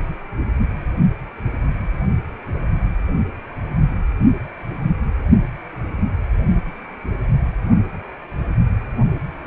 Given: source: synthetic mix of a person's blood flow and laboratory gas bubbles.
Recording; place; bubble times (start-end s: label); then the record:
Doppler ultrasound of blood flow; precordium
no bubbles
From the record:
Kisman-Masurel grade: 000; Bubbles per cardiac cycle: 0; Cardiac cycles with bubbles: 0%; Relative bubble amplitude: no bubbles discernible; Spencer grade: 0 (complete lack of bubble signals)